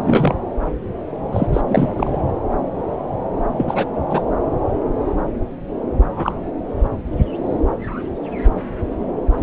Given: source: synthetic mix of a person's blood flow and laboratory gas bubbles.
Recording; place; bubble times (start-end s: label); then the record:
Doppler ultrasound of blood flow; subclavian vein
0.01-0.36 s: bubbles
1.32-1.47 s: bubbles
1.52-1.61 s: bubbles
1.69-1.92 s: bubbles
1.97-2.17 s: bubbles
3.56-3.86 s: bubbles
4.10-4.22 s: bubbles
6.11-6.41 s: bubbles
From the record:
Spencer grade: 2 (many but less than half of the cardiac periods contain bubble signals, singularly or in groups); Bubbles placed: anywhere in the cardiac cycle